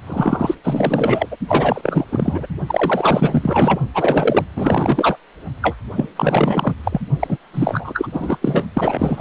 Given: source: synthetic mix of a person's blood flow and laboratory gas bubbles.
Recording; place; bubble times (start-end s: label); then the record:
Doppler ultrasound of blood flow; precordium
0.07-0.55 s: bubbles
0.64-1.29 s: bubbles
1.31-1.36 s: bubbles
1.47-2.04 s: bubbles
2.11-2.46 s: bubbles
2.67-3.80 s: bubbles
3.94-4.45 s: bubbles
4.56-5.17 s: bubbles
5.62-5.76 s: bubbles
5.95-6.08 s: bubbles
6.16-6.75 s: bubbles
6.83-7.00 s: bubbles
7.20-7.38 s: bubbles
7.54-8.07 s: bubbles
8.12-8.37 s: bubbles
8.41-8.63 s: bubbles
8.73-9.21 s: bubbles
From the record:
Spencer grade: 4 (maximum detectable bubble signal sounding continuously throughout systole and diastole of every cardiac period, and overriding the amplitude of the normal cardiac signals); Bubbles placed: only in the low amplitude regions of the cardiac cycle